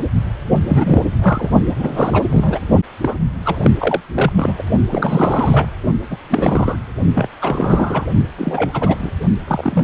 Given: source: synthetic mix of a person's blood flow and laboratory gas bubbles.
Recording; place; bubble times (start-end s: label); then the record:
Doppler ultrasound of blood flow; precordium
0.49-0.59 s: bubbles
0.67-1.02 s: bubbles
1.21-1.49 s: bubbles
1.78-1.89 s: bubbles
1.92-2.24 s: bubbles
2.31-2.60 s: bubbles
3.01-3.15 s: bubbles
3.44-3.57 s: bubbles
3.62-3.71 s: bubbles
3.79-4.01 s: bubbles
4.15-4.33 s: bubbles
4.36-4.54 s: bubbles
4.58-4.62 s: bubbles
4.90-5.71 s: bubbles
6.11-6.17 s: bubbles
6.29-6.77 s: bubbles
7.14-7.28 s: bubbles
7.42-8.05 s: bubbles
8.38-9.11 s: bubbles
9.47-9.84 s: bubbles
From the record:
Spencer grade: 3 (all of the cardiac periods contain showers or single bubble signals, but not dominating or overriding the cardiac motion signals); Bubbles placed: only in the low amplitude regions of the cardiac cycle